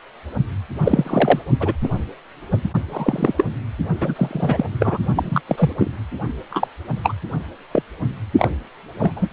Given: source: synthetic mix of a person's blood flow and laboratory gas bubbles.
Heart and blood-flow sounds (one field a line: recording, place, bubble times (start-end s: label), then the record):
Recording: Doppler ultrasound of blood flow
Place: precordium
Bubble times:
0.83-1.42 s: bubbles
1.60-1.73 s: bubbles
1.83-1.89 s: bubbles
2.52-2.57 s: bubbles
2.64-2.70 s: bubbles
2.89-3.34 s: bubbles
3.38-3.45 s: bubbles
4.00-4.66 s: bubbles
4.80-4.97 s: bubbles
5.15-5.41 s: bubbles
5.47-5.73 s: bubbles
5.79-5.91 s: bubbles
6.50-6.67 s: bubbles
7.03-7.13 s: bubbles
7.71-7.82 s: bubbles
8.38-8.51 s: bubbles
8.99-9.13 s: bubbles
9.16-9.29 s: bubbles
From the record:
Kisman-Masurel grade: 243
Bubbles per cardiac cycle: several, 3 to 8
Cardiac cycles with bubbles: 100%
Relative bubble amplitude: loud (0.450 to 0.775)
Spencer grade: 3 (all of the cardiac periods contain showers or single bubble signals, but not dominating or overriding the cardiac motion signals)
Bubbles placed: only in the low amplitude regions of the cardiac cycle